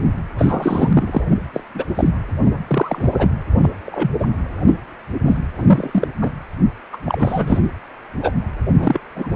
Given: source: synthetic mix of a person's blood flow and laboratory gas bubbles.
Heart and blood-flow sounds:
Doppler ultrasound of blood flow; precordium
0.38-1.22 s: bubbles
1.53-1.61 s: bubbles
1.75-1.85 s: bubbles
1.95-2.10 s: bubbles
2.68-3.29 s: bubbles
3.64-3.67 s: bubbles
3.86-4.11 s: bubbles
4.19-4.27 s: bubbles
5.25-5.38 s: bubbles
5.55-6.07 s: bubbles
6.21-6.32 s: bubbles
6.92-6.97 s: bubbles
7.05-7.60 s: bubbles
8.21-8.33 s: bubbles
8.76-9.00 s: bubbles
9.16-9.27 s: bubbles
From the record:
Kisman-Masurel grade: 243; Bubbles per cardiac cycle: several, 3 to 8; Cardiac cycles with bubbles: 100%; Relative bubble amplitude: loud (0.450 to 0.775); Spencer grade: 3 (all of the cardiac periods contain showers or single bubble signals, but not dominating or overriding the cardiac motion signals); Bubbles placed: anywhere in the cardiac cycle

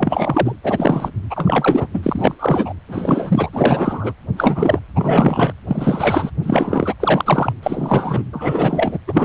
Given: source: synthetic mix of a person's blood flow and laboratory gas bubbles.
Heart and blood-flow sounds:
Doppler ultrasound of blood flow; precordium
0.00-0.53 s: bubbles
0.63-1.10 s: bubbles
1.30-1.88 s: bubbles
1.94-2.34 s: bubbles
2.39-2.73 s: bubbles
2.88-3.50 s: bubbles
3.52-4.13 s: bubbles
4.36-4.79 s: bubbles
4.96-5.53 s: bubbles
5.67-6.31 s: bubbles
6.43-6.94 s: bubbles
7.00-7.53 s: bubbles
7.62-8.24 s: bubbles
8.33-8.99 s: bubbles
9.07-9.25 s: bubbles
From the record:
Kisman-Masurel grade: 343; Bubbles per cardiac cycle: rolling drumbeat, 9 or more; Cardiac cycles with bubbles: 100%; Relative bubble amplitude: loud (0.450 to 0.775); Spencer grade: 3 (all of the cardiac periods contain showers or single bubble signals, but not dominating or overriding the cardiac motion signals); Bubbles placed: anywhere in the cardiac cycle

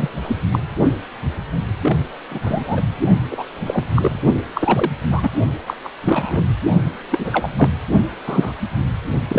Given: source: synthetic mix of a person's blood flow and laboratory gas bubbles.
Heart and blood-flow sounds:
Doppler ultrasound of blood flow; precordium
0.00-0.09 s: bubbles
0.23-0.37 s: bubbles
0.52-0.59 s: bubbles
1.69-1.98 s: bubbles
2.30-2.81 s: bubbles
3.31-3.44 s: bubbles
3.66-3.83 s: bubbles
3.95-4.20 s: bubbles
4.33-4.41 s: bubbles
4.55-4.91 s: bubbles
5.11-5.30 s: bubbles
5.67-5.74 s: bubbles
5.83-5.89 s: bubbles
6.04-6.45 s: bubbles
7.12-7.49 s: bubbles
7.57-7.75 s: bubbles
8.27-8.53 s: bubbles
9.28-9.39 s: bubbles
From the record:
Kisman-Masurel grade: 242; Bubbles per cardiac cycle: several, 3 to 8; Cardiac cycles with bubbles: 100%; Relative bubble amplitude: moderate (0.250 to 0.450); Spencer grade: 3 (all of the cardiac periods contain showers or single bubble signals, but not dominating or overriding the cardiac motion signals); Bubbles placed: only in the low amplitude regions of the cardiac cycle

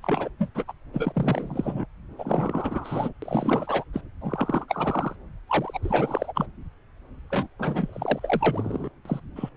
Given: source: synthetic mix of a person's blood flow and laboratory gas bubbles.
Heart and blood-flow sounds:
Doppler ultrasound of blood flow; subclavian vein
0.02-0.29 s: bubbles
0.39-0.49 s: bubbles
0.55-0.64 s: bubbles
0.67-0.72 s: bubbles
0.93-1.85 s: bubbles
2.19-3.13 s: bubbles
3.22-3.83 s: bubbles
3.93-4.01 s: bubbles
4.21-4.65 s: bubbles
4.68-5.16 s: bubbles
5.49-5.79 s: bubbles
5.82-6.46 s: bubbles
7.30-7.48 s: bubbles
7.58-8.89 s: bubbles
9.05-9.20 s: bubbles
9.36-9.49 s: bubbles
From the record:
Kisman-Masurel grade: 342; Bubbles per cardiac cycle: rolling drumbeat, 9 or more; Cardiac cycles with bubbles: 100%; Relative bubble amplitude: moderate (0.250 to 0.450); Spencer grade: 3 (all of the cardiac periods contain showers or single bubble signals, but not dominating or overriding the cardiac motion signals); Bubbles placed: anywhere in the cardiac cycle

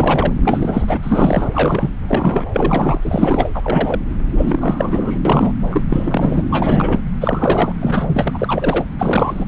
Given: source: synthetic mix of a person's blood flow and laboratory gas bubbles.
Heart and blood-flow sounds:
Doppler ultrasound of blood flow; subclavian vein
0.00-0.33 s: bubbles
0.44-1.49 s: bubbles
1.53-1.91 s: bubbles
2.08-2.46 s: bubbles
2.53-3.50 s: bubbles
3.54-4.00 s: bubbles
4.37-5.19 s: bubbles
5.25-5.53 s: bubbles
5.70-5.84 s: bubbles
5.88-6.42 s: bubbles
6.50-7.01 s: bubbles
7.21-7.73 s: bubbles
7.80-8.84 s: bubbles
8.98-9.45 s: bubbles
From the record:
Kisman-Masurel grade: 343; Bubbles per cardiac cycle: rolling drumbeat, 9 or more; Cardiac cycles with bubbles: 100%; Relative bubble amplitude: loud (0.450 to 0.775); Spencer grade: 3 (all of the cardiac periods contain showers or single bubble signals, but not dominating or overriding the cardiac motion signals); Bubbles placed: anywhere in the cardiac cycle

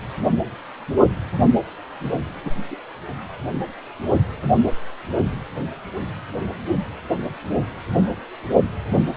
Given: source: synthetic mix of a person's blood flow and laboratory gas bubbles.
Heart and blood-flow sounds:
Doppler ultrasound of blood flow; precordium
0.23-0.30 s: bubbles
2.42-2.56 s: bubbles
2.70-2.76 s: bubbles
8.89-9.03 s: bubbles
From the record:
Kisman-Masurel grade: 121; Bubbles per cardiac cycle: 1 to 2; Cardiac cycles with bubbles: 10 to 50%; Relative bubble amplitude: barely perceptible (0.100 to 0.250); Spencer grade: 2 (many but less than half of the cardiac periods contain bubble signals, singularly or in groups); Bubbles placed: only in the low amplitude regions of the cardiac cycle

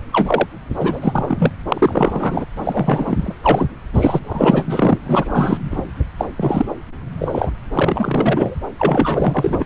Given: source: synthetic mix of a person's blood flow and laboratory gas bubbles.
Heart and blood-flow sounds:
Doppler ultrasound of blood flow; subclavian vein
0.12-0.46 s: bubbles
0.79-1.50 s: bubbles
1.70-2.46 s: bubbles
2.57-3.35 s: bubbles
3.44-3.67 s: bubbles
3.93-4.20 s: bubbles
4.23-4.98 s: bubbles
5.04-5.58 s: bubbles
5.71-5.83 s: bubbles
6.18-6.25 s: bubbles
6.37-6.66 s: bubbles
7.17-7.51 s: bubbles
7.74-8.55 s: bubbles
8.79-9.66 s: bubbles
From the record:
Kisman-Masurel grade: 343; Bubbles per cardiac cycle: rolling drumbeat, 9 or more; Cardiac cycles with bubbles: 100%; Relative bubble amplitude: loud (0.450 to 0.775); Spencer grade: 3 (all of the cardiac periods contain showers or single bubble signals, but not dominating or overriding the cardiac motion signals); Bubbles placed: anywhere in the cardiac cycle

